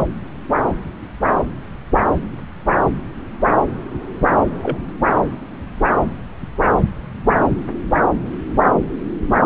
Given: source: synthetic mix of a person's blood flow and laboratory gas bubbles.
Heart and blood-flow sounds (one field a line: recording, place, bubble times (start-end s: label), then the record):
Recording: Doppler ultrasound of blood flow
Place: subclavian vein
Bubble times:
4.62-4.77 s: bubbles
From the record:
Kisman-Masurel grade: 122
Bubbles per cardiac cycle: 1 to 2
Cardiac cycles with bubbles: 10 to 50%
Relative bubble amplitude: moderate (0.250 to 0.450)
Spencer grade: 2 (many but less than half of the cardiac periods contain bubble signals, singularly or in groups)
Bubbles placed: anywhere in the cardiac cycle